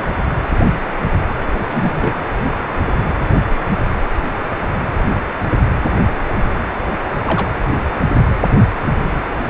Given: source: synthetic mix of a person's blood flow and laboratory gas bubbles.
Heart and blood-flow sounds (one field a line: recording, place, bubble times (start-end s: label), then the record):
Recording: Doppler ultrasound of blood flow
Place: precordium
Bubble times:
1.73-2.13 s: bubbles
7.27-7.49 s: bubbles
From the record:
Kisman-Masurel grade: 122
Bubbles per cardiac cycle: 1 to 2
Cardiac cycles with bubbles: 10 to 50%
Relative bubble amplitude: moderate (0.250 to 0.450)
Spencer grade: 2 (many but less than half of the cardiac periods contain bubble signals, singularly or in groups)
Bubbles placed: anywhere in the cardiac cycle